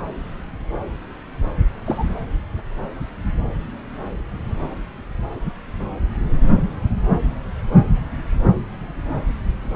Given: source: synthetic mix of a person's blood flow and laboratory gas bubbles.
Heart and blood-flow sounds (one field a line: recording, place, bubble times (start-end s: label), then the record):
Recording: Doppler ultrasound of blood flow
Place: subclavian vein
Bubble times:
1.86-2.12 s: bubbles
From the record:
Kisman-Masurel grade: 112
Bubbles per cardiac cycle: 1 to 2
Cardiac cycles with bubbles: 1 to 10%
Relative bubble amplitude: moderate (0.250 to 0.450)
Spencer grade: 1 (occasional bubble signal discernible with the cardiac motion signal, with majority of cardiac periods free of bubbles)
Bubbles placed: anywhere in the cardiac cycle